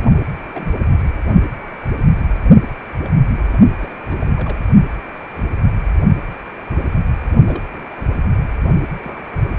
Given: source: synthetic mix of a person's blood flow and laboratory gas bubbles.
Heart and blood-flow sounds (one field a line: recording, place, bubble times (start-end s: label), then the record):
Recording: Doppler ultrasound of blood flow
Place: precordium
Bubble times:
0.53-0.67 s: bubbles
0.74-0.79 s: bubbles
3.05-3.13 s: bubbles
3.23-3.58 s: bubbles
3.79-3.94 s: bubbles
4.08-4.33 s: bubbles
4.36-4.59 s: bubbles
7.47-7.63 s: bubbles
7.74-7.83 s: bubbles
7.91-8.04 s: bubbles
8.44-8.49 s: bubbles
9.02-9.49 s: bubbles
From the record:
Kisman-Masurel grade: 221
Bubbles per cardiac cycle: several, 3 to 8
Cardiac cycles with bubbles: 10 to 50%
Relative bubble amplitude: barely perceptible (0.100 to 0.250)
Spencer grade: 2 (many but less than half of the cardiac periods contain bubble signals, singularly or in groups)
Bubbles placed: only in the low amplitude regions of the cardiac cycle